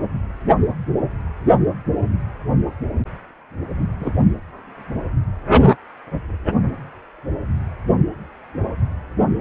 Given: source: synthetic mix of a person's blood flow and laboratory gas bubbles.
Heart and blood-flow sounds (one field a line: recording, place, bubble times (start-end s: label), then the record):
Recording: Doppler ultrasound of blood flow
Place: precordium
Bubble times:
4.00-4.11 s: bubbles
From the record:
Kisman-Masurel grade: 113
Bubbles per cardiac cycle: 1 to 2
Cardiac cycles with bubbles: 1 to 10%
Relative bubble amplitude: loud (0.450 to 0.775)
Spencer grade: 1 (occasional bubble signal discernible with the cardiac motion signal, with majority of cardiac periods free of bubbles)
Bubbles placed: only in the low amplitude regions of the cardiac cycle